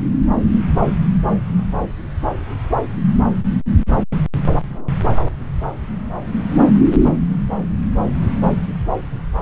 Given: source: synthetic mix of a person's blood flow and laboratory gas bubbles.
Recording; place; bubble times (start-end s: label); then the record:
Doppler ultrasound of blood flow; subclavian vein
4.69-4.95 s: bubbles
From the record:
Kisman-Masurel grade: 111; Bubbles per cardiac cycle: 1 to 2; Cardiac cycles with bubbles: 1 to 10%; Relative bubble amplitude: barely perceptible (0.100 to 0.250); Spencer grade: 1 (occasional bubble signal discernible with the cardiac motion signal, with majority of cardiac periods free of bubbles); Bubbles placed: anywhere in the cardiac cycle